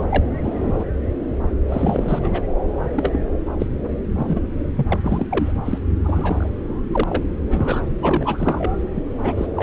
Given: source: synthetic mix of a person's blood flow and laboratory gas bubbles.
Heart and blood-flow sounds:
Doppler ultrasound of blood flow; subclavian vein
0.00-0.06 s: bubbles
0.09-0.24 s: bubbles
0.43-0.84 s: bubbles
1.69-2.19 s: bubbles
2.23-2.42 s: bubbles
2.94-3.19 s: bubbles
3.59-3.66 s: bubbles
4.16-4.40 s: bubbles
4.76-4.87 s: bubbles
4.90-4.99 s: bubbles
5.04-5.27 s: bubbles
5.30-5.53 s: bubbles
5.65-5.78 s: bubbles
6.00-6.50 s: bubbles
6.92-7.04 s: bubbles
7.08-7.24 s: bubbles
7.49-7.83 s: bubbles
8.02-8.75 s: bubbles
8.95-9.02 s: bubbles
9.21-9.33 s: bubbles
9.37-9.46 s: bubbles
9.56-9.63 s: bubbles
From the record:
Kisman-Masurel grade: 242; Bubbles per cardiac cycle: several, 3 to 8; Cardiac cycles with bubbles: 100%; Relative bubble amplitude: moderate (0.250 to 0.450); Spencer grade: 3 (all of the cardiac periods contain showers or single bubble signals, but not dominating or overriding the cardiac motion signals); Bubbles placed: anywhere in the cardiac cycle

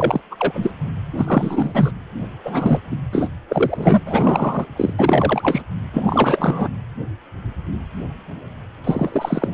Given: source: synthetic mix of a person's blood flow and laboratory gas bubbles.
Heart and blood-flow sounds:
Doppler ultrasound of blood flow; precordium
0.00-0.21 s: bubbles
0.30-0.71 s: bubbles
1.17-1.91 s: bubbles
2.44-2.81 s: bubbles
2.91-2.96 s: bubbles
3.12-3.29 s: bubbles
3.48-4.00 s: bubbles
4.05-4.66 s: bubbles
4.76-4.93 s: bubbles
4.99-5.62 s: bubbles
5.92-6.68 s: bubbles
8.84-9.48 s: bubbles
9.52-9.54 s: bubbles
From the record:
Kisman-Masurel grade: 333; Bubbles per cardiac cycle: rolling drumbeat, 9 or more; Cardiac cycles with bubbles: 50 to 99%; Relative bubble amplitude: loud (0.450 to 0.775); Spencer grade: 3 (all of the cardiac periods contain showers or single bubble signals, but not dominating or overriding the cardiac motion signals); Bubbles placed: anywhere in the cardiac cycle

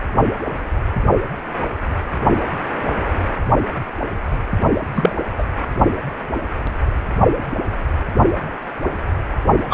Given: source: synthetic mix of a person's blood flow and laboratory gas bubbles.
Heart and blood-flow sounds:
Doppler ultrasound of blood flow; precordium
4.95-5.16 s: bubbles
5.38-5.44 s: bubbles
9.70-9.74 s: bubbles
From the record:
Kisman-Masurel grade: 223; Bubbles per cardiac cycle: several, 3 to 8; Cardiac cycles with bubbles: 10 to 50%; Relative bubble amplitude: loud (0.450 to 0.775); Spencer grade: 2 (many but less than half of the cardiac periods contain bubble signals, singularly or in groups); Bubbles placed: only in the low amplitude regions of the cardiac cycle

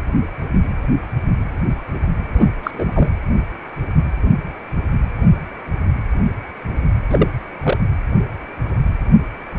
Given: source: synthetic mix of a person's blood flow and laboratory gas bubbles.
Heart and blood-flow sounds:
Doppler ultrasound of blood flow; precordium
2.34-2.49 s: bubbles
2.63-3.08 s: bubbles
7.10-7.28 s: bubbles
7.63-7.77 s: bubbles
From the record:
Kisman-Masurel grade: 223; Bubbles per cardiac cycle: several, 3 to 8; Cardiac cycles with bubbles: 10 to 50%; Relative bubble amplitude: loud (0.450 to 0.775); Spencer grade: 2 (many but less than half of the cardiac periods contain bubble signals, singularly or in groups); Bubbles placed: anywhere in the cardiac cycle

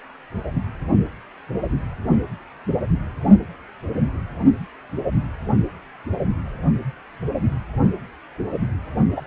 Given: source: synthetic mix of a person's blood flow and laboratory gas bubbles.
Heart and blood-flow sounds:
Doppler ultrasound of blood flow; precordium
9.16-9.21 s: bubbles
From the record:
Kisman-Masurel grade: 113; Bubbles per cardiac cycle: 1 to 2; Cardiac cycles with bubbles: 1 to 10%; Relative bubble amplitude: loud (0.450 to 0.775); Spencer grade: 1 (occasional bubble signal discernible with the cardiac motion signal, with majority of cardiac periods free of bubbles); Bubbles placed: anywhere in the cardiac cycle

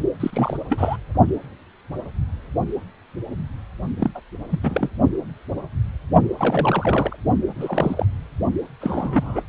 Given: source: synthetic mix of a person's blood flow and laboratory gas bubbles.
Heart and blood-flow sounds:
Doppler ultrasound of blood flow; precordium
0.20-0.57 s: bubbles
0.69-0.97 s: bubbles
3.99-4.10 s: bubbles
4.14-4.21 s: bubbles
4.50-4.59 s: bubbles
4.62-4.90 s: bubbles
6.38-7.17 s: bubbles
7.48-8.06 s: bubbles
8.81-9.43 s: bubbles
From the record:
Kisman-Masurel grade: 222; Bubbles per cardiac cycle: several, 3 to 8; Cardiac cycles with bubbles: 10 to 50%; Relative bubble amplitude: moderate (0.250 to 0.450); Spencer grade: 2 (many but less than half of the cardiac periods contain bubble signals, singularly or in groups); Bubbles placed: only in the low amplitude regions of the cardiac cycle

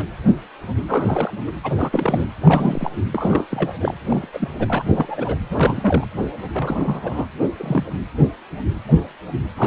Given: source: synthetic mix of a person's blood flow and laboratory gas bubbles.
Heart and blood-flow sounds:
Doppler ultrasound of blood flow; precordium
0.00-0.05 s: bubbles
0.88-1.32 s: bubbles
1.45-1.52 s: bubbles
1.63-1.71 s: bubbles
1.75-2.26 s: bubbles
2.42-2.90 s: bubbles
3.12-3.46 s: bubbles
3.50-3.73 s: bubbles
3.80-3.94 s: bubbles
4.04-4.27 s: bubbles
4.33-4.49 s: bubbles
4.59-5.38 s: bubbles
5.50-6.06 s: bubbles
6.42-6.50 s: bubbles
6.52-7.26 s: bubbles
7.56-7.90 s: bubbles
9.56-9.67 s: bubbles
From the record:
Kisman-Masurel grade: 332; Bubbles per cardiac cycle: rolling drumbeat, 9 or more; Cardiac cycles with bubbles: 50 to 99%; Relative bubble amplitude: moderate (0.250 to 0.450); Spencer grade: 3 (all of the cardiac periods contain showers or single bubble signals, but not dominating or overriding the cardiac motion signals); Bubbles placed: anywhere in the cardiac cycle

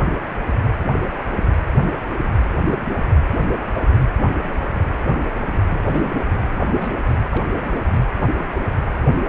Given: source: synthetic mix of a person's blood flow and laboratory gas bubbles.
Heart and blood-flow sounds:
Doppler ultrasound of blood flow; precordium
5.78-6.17 s: bubbles
6.69-7.15 s: bubbles
7.31-7.45 s: bubbles
7.54-8.06 s: bubbles
8.21-8.39 s: bubbles
8.52-8.71 s: bubbles
From the record:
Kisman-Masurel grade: 221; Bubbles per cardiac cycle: several, 3 to 8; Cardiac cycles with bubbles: 10 to 50%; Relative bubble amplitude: barely perceptible (0.100 to 0.250); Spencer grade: 2 (many but less than half of the cardiac periods contain bubble signals, singularly or in groups); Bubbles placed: anywhere in the cardiac cycle

